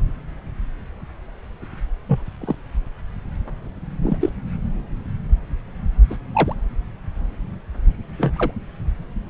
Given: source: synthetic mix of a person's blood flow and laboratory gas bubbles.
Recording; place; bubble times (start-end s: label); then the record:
Doppler ultrasound of blood flow; subclavian vein
2.08-2.22 s: bubbles
2.41-2.55 s: bubbles
4.02-4.17 s: bubbles
4.20-4.29 s: bubbles
6.10-6.16 s: bubbles
6.33-6.55 s: bubbles
8.18-8.51 s: bubbles
From the record:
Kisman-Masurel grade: 122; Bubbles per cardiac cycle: 1 to 2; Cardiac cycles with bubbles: 10 to 50%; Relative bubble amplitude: moderate (0.250 to 0.450); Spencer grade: 2 (many but less than half of the cardiac periods contain bubble signals, singularly or in groups); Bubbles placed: anywhere in the cardiac cycle